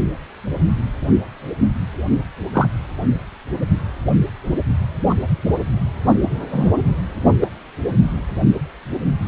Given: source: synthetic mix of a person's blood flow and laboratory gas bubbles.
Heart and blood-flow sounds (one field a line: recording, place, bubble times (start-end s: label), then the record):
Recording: Doppler ultrasound of blood flow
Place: precordium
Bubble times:
2.52-2.68 s: bubbles
5.09-5.15 s: bubbles
6.53-6.72 s: bubbles
7.40-7.48 s: bubbles
From the record:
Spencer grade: 2 (many but less than half of the cardiac periods contain bubble signals, singularly or in groups)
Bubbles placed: only in the low amplitude regions of the cardiac cycle